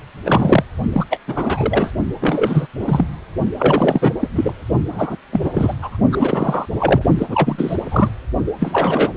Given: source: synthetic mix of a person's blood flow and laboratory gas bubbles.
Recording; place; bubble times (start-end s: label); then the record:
Doppler ultrasound of blood flow; precordium
0.25-0.64 s: bubbles
0.93-1.05 s: bubbles
1.10-1.19 s: bubbles
1.28-1.93 s: bubbles
2.21-2.67 s: bubbles
2.79-3.04 s: bubbles
3.60-4.11 s: bubbles
4.19-4.28 s: bubbles
4.35-4.52 s: bubbles
4.92-5.16 s: bubbles
5.32-5.49 s: bubbles
5.54-5.75 s: bubbles
5.78-5.97 s: bubbles
6.12-6.65 s: bubbles
6.79-7.02 s: bubbles
7.18-7.76 s: bubbles
7.91-8.12 s: bubbles
8.46-8.52 s: bubbles
8.60-9.13 s: bubbles
From the record:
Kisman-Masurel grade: 343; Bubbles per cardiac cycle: rolling drumbeat, 9 or more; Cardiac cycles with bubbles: 100%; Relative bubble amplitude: loud (0.450 to 0.775); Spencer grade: 3 (all of the cardiac periods contain showers or single bubble signals, but not dominating or overriding the cardiac motion signals); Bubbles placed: only in the low amplitude regions of the cardiac cycle